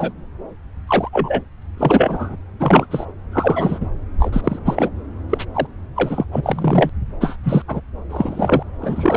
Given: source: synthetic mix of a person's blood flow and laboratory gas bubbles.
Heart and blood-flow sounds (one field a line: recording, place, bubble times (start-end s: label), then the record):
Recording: Doppler ultrasound of blood flow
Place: subclavian vein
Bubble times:
0.00-0.12 s: bubbles
0.87-1.09 s: bubbles
1.12-1.42 s: bubbles
1.77-2.36 s: bubbles
2.60-2.87 s: bubbles
2.90-3.06 s: bubbles
3.32-3.86 s: bubbles
4.19-4.41 s: bubbles
4.44-4.60 s: bubbles
4.64-4.89 s: bubbles
5.29-5.45 s: bubbles
5.54-5.66 s: bubbles
5.96-6.24 s: bubbles
6.32-6.90 s: bubbles
7.21-7.36 s: bubbles
7.44-7.62 s: bubbles
7.67-7.81 s: bubbles
8.09-8.63 s: bubbles
8.81-9.17 s: bubbles
From the record:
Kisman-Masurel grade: 243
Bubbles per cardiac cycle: several, 3 to 8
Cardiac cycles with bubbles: 100%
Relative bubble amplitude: loud (0.450 to 0.775)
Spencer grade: 3 (all of the cardiac periods contain showers or single bubble signals, but not dominating or overriding the cardiac motion signals)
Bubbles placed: anywhere in the cardiac cycle